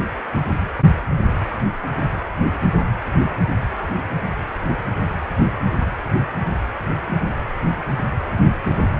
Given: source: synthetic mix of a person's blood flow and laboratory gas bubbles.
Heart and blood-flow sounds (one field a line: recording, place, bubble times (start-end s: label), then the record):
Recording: Doppler ultrasound of blood flow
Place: precordium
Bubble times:
no bubbles
From the record:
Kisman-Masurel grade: 000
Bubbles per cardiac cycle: 0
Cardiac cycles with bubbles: 0%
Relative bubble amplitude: no bubbles discernible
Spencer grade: 0 (complete lack of bubble signals)